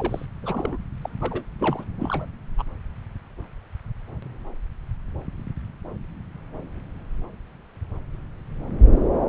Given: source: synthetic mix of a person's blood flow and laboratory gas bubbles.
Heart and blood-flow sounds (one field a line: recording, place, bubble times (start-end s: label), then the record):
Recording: Doppler ultrasound of blood flow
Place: subclavian vein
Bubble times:
0.00-0.26 s: bubbles
0.43-0.78 s: bubbles
1.02-1.10 s: bubbles
1.19-1.44 s: bubbles
1.58-1.85 s: bubbles
2.01-2.25 s: bubbles
2.58-2.64 s: bubbles
From the record:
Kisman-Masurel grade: 221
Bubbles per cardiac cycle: several, 3 to 8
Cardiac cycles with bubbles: 10 to 50%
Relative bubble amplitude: barely perceptible (0.100 to 0.250)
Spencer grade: 2 (many but less than half of the cardiac periods contain bubble signals, singularly or in groups)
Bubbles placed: anywhere in the cardiac cycle